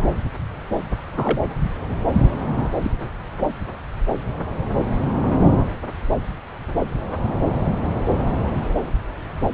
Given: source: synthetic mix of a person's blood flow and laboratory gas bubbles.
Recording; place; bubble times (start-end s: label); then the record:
Doppler ultrasound of blood flow; subclavian vein
1.17-1.40 s: bubbles
2.83-2.91 s: bubbles
From the record:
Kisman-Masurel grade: 112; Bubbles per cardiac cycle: 1 to 2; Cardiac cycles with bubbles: 1 to 10%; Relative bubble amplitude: moderate (0.250 to 0.450); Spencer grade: 1 (occasional bubble signal discernible with the cardiac motion signal, with majority of cardiac periods free of bubbles); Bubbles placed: anywhere in the cardiac cycle